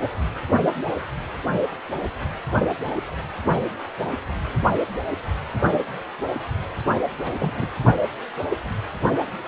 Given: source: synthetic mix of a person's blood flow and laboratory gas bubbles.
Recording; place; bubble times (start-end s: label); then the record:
Doppler ultrasound of blood flow; precordium
7.24-7.70 s: bubbles
From the record:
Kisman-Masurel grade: 211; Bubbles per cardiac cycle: several, 3 to 8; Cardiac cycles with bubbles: 1 to 10%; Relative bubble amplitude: barely perceptible (0.100 to 0.250); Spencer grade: 1 (occasional bubble signal discernible with the cardiac motion signal, with majority of cardiac periods free of bubbles); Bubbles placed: only in the low amplitude regions of the cardiac cycle